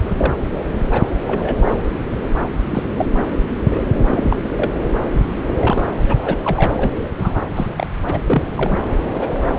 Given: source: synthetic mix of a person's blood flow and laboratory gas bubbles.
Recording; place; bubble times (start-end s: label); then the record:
Doppler ultrasound of blood flow; subclavian vein
0.04-0.34 s: bubbles
0.91-1.02 s: bubbles
1.27-1.56 s: bubbles
1.64-1.75 s: bubbles
2.71-2.83 s: bubbles
2.97-3.05 s: bubbles
3.68-3.83 s: bubbles
4.09-4.51 s: bubbles
4.55-4.70 s: bubbles
4.74-4.80 s: bubbles
5.46-5.54 s: bubbles
5.59-5.84 s: bubbles
6.08-6.14 s: bubbles
6.21-6.37 s: bubbles
6.44-6.99 s: bubbles
7.17-7.42 s: bubbles
7.56-7.67 s: bubbles
7.76-7.87 s: bubbles
8.06-8.20 s: bubbles
8.26-8.43 s: bubbles
8.56-8.76 s: bubbles
9.20-9.29 s: bubbles
From the record:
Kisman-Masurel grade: 242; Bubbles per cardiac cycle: several, 3 to 8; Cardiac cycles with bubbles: 100%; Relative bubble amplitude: moderate (0.250 to 0.450); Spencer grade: 3 (all of the cardiac periods contain showers or single bubble signals, but not dominating or overriding the cardiac motion signals); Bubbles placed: anywhere in the cardiac cycle